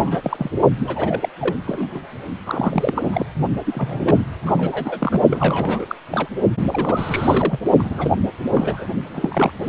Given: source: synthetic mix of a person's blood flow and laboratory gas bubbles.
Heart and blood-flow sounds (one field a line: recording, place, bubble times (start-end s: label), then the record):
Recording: Doppler ultrasound of blood flow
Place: precordium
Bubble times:
0.00-0.51 s: bubbles
0.80-1.29 s: bubbles
1.40-1.55 s: bubbles
1.67-1.88 s: bubbles
1.94-1.99 s: bubbles
2.46-3.25 s: bubbles
3.65-4.18 s: bubbles
4.46-5.21 s: bubbles
5.30-5.85 s: bubbles
5.88-5.96 s: bubbles
6.10-6.28 s: bubbles
6.68-7.59 s: bubbles
7.79-8.11 s: bubbles
8.51-8.87 s: bubbles
9.14-9.52 s: bubbles
9.61-9.69 s: bubbles
From the record:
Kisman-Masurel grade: 342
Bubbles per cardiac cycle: rolling drumbeat, 9 or more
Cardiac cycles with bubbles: 100%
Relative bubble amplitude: moderate (0.250 to 0.450)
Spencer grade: 3 (all of the cardiac periods contain showers or single bubble signals, but not dominating or overriding the cardiac motion signals)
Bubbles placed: only in the low amplitude regions of the cardiac cycle